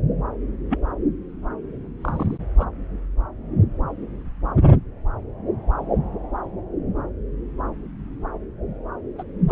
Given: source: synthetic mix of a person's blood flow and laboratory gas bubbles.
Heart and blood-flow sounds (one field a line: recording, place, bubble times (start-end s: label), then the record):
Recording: Doppler ultrasound of blood flow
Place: subclavian vein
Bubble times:
0.69-0.79 s: bubbles
2.01-2.38 s: bubbles
2.59-2.65 s: bubbles
9.18-9.23 s: bubbles
9.48-9.51 s: bubbles
From the record:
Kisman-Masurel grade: 121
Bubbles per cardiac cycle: 1 to 2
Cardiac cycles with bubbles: 10 to 50%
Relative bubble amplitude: barely perceptible (0.100 to 0.250)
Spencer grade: 2 (many but less than half of the cardiac periods contain bubble signals, singularly or in groups)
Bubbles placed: anywhere in the cardiac cycle